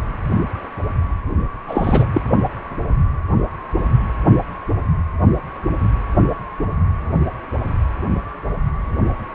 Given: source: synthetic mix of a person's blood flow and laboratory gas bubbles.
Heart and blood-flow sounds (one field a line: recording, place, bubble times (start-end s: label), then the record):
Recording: Doppler ultrasound of blood flow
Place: precordium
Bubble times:
1.67-2.07 s: bubbles
2.14-2.21 s: bubbles
From the record:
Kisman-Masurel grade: 223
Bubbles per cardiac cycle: several, 3 to 8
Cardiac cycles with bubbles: 10 to 50%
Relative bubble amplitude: loud (0.450 to 0.775)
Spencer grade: 2 (many but less than half of the cardiac periods contain bubble signals, singularly or in groups)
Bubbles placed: only in the low amplitude regions of the cardiac cycle